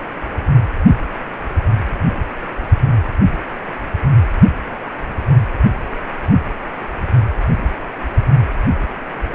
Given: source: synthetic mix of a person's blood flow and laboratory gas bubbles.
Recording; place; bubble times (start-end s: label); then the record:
Doppler ultrasound of blood flow; precordium
no bubbles
From the record:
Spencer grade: 0 (complete lack of bubble signals)